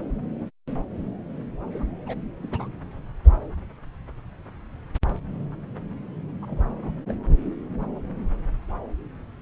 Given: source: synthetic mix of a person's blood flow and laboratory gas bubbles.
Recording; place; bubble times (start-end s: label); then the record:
Doppler ultrasound of blood flow; subclavian vein
1.74-1.83 s: bubbles
2.06-2.16 s: bubbles
2.43-2.48 s: bubbles
2.52-2.68 s: bubbles
3.25-3.31 s: bubbles
6.42-6.66 s: bubbles
6.83-6.91 s: bubbles
7.08-7.14 s: bubbles
7.81-7.86 s: bubbles
From the record:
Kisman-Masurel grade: 221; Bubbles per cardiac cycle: several, 3 to 8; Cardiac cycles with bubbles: 10 to 50%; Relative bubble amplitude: barely perceptible (0.100 to 0.250); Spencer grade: 2 (many but less than half of the cardiac periods contain bubble signals, singularly or in groups); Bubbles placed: anywhere in the cardiac cycle